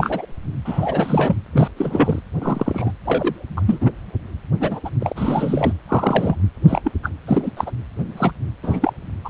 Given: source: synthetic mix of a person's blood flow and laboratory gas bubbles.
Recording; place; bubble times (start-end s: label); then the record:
Doppler ultrasound of blood flow; precordium
0.00-0.26 s: bubbles
0.65-1.36 s: bubbles
1.53-1.68 s: bubbles
1.76-2.19 s: bubbles
2.42-2.92 s: bubbles
3.05-3.46 s: bubbles
3.57-3.62 s: bubbles
3.66-3.91 s: bubbles
4.61-4.80 s: bubbles
4.85-4.90 s: bubbles
5.00-5.12 s: bubbles
5.16-5.73 s: bubbles
5.88-6.36 s: bubbles
6.68-6.81 s: bubbles
6.83-6.92 s: bubbles
7.03-7.10 s: bubbles
7.27-7.51 s: bubbles
7.57-7.71 s: bubbles
8.16-8.31 s: bubbles
8.62-8.93 s: bubbles
9.24-9.29 s: bubbles
From the record:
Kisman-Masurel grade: 242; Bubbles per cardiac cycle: several, 3 to 8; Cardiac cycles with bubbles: 100%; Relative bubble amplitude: moderate (0.250 to 0.450); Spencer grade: 3 (all of the cardiac periods contain showers or single bubble signals, but not dominating or overriding the cardiac motion signals); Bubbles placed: anywhere in the cardiac cycle